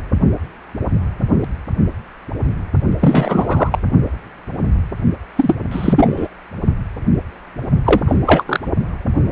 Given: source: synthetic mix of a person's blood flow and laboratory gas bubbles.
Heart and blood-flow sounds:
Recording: Doppler ultrasound of blood flow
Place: precordium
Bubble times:
3.00-3.79 s: bubbles
5.35-5.55 s: bubbles
5.71-6.28 s: bubbles
7.85-8.01 s: bubbles
8.06-8.16 s: bubbles
8.25-8.44 s: bubbles
8.46-8.60 s: bubbles
From the record:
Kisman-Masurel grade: 223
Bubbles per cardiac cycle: several, 3 to 8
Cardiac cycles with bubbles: 10 to 50%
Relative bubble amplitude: loud (0.450 to 0.775)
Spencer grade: 2 (many but less than half of the cardiac periods contain bubble signals, singularly or in groups)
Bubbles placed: only in the low amplitude regions of the cardiac cycle

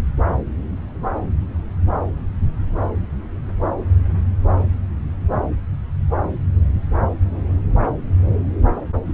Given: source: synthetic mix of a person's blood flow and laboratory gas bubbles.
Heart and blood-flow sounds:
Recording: Doppler ultrasound of blood flow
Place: subclavian vein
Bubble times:
no bubbles
From the record:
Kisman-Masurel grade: 000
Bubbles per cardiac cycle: 0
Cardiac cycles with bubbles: 0%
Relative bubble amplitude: no bubbles discernible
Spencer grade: 0 (complete lack of bubble signals)

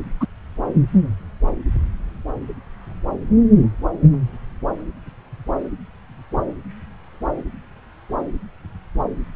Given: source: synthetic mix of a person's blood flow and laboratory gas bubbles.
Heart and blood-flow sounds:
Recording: Doppler ultrasound of blood flow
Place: subclavian vein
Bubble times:
0.20-0.26 s: bubbles
From the record:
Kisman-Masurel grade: 113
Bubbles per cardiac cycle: 1 to 2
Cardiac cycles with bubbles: 1 to 10%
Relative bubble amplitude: loud (0.450 to 0.775)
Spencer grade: 1 (occasional bubble signal discernible with the cardiac motion signal, with majority of cardiac periods free of bubbles)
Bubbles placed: anywhere in the cardiac cycle

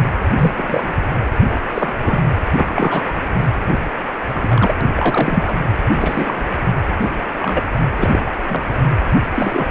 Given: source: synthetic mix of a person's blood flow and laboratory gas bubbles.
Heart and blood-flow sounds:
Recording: Doppler ultrasound of blood flow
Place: precordium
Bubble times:
0.31-0.52 s: bubbles
0.56-0.88 s: bubbles
1.74-2.20 s: bubbles
2.56-2.69 s: bubbles
2.75-3.02 s: bubbles
3.15-3.21 s: bubbles
4.34-4.75 s: bubbles
4.80-4.86 s: bubbles
4.93-5.56 s: bubbles
5.95-6.45 s: bubbles
7.01-7.11 s: bubbles
7.42-7.64 s: bubbles
7.98-8.21 s: bubbles
8.49-8.63 s: bubbles
9.35-9.68 s: bubbles
From the record:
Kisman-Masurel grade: 242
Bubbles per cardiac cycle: several, 3 to 8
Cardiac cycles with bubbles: 100%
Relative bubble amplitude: moderate (0.250 to 0.450)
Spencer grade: 3 (all of the cardiac periods contain showers or single bubble signals, but not dominating or overriding the cardiac motion signals)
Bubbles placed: anywhere in the cardiac cycle

